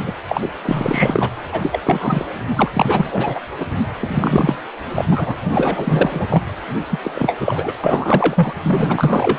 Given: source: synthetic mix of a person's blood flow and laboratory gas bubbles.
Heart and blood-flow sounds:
Doppler ultrasound of blood flow; precordium
0.02-0.12 s: bubbles
0.27-0.49 s: bubbles
0.65-1.30 s: bubbles
1.47-1.79 s: bubbles
1.84-2.25 s: bubbles
2.55-2.69 s: bubbles
2.73-3.40 s: bubbles
3.60-3.65 s: bubbles
3.98-4.56 s: bubbles
4.91-5.36 s: bubbles
5.50-6.26 s: bubbles
6.29-6.42 s: bubbles
6.91-6.99 s: bubbles
7.04-7.10 s: bubbles
7.15-7.37 s: bubbles
7.40-7.73 s: bubbles
7.83-8.54 s: bubbles
8.64-9.38 s: bubbles
From the record:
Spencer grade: 3 (all of the cardiac periods contain showers or single bubble signals, but not dominating or overriding the cardiac motion signals); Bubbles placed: anywhere in the cardiac cycle

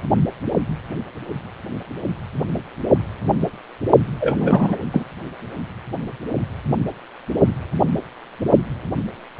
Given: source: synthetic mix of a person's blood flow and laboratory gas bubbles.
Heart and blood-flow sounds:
Doppler ultrasound of blood flow; precordium
4.20-4.76 s: bubbles
4.92-5.05 s: bubbles
From the record:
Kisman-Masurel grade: 213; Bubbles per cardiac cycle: several, 3 to 8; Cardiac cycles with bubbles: 1 to 10%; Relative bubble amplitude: loud (0.450 to 0.775); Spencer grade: 1 (occasional bubble signal discernible with the cardiac motion signal, with majority of cardiac periods free of bubbles); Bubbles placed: only in the low amplitude regions of the cardiac cycle

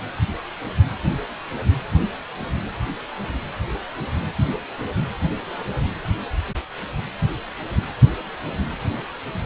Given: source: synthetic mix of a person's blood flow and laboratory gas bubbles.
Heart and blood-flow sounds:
Doppler ultrasound of blood flow; precordium
no bubbles
From the record:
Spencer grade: 0 (complete lack of bubble signals)

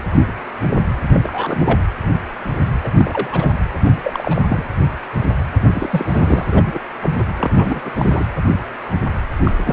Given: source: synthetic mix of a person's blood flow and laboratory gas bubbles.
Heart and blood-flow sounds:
Doppler ultrasound of blood flow; precordium
1.12-1.21 s: bubbles
1.23-1.81 s: bubbles
2.83-2.89 s: bubbles
2.97-3.52 s: bubbles
3.84-3.92 s: bubbles
4.04-4.42 s: bubbles
4.49-4.68 s: bubbles
5.74-6.45 s: bubbles
6.51-6.79 s: bubbles
7.03-7.24 s: bubbles
7.37-7.82 s: bubbles
7.84-7.91 s: bubbles
7.94-8.25 s: bubbles
9.43-9.52 s: bubbles
9.65-9.73 s: bubbles
From the record:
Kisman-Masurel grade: 232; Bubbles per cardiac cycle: several, 3 to 8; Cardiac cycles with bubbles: 50 to 99%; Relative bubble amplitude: moderate (0.250 to 0.450); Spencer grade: 3 (all of the cardiac periods contain showers or single bubble signals, but not dominating or overriding the cardiac motion signals); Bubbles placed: anywhere in the cardiac cycle

